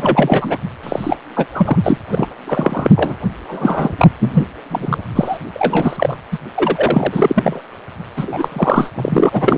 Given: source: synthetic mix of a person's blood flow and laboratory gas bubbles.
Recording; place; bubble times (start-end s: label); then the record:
Doppler ultrasound of blood flow; precordium
0.00-0.58 s: bubbles
0.83-1.17 s: bubbles
1.35-1.47 s: bubbles
1.54-1.77 s: bubbles
1.83-1.98 s: bubbles
2.11-2.27 s: bubbles
2.47-2.90 s: bubbles
2.95-3.16 s: bubbles
3.48-3.94 s: bubbles
3.98-4.09 s: bubbles
4.20-4.46 s: bubbles
4.70-4.98 s: bubbles
5.15-5.38 s: bubbles
5.54-6.16 s: bubbles
6.31-6.38 s: bubbles
6.55-7.62 s: bubbles
8.16-8.90 s: bubbles
8.95-9.29 s: bubbles
9.32-9.58 s: bubbles
From the record:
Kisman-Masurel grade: 343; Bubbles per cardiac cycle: rolling drumbeat, 9 or more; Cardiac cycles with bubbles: 100%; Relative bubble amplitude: loud (0.450 to 0.775); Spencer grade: 3 (all of the cardiac periods contain showers or single bubble signals, but not dominating or overriding the cardiac motion signals); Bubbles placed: anywhere in the cardiac cycle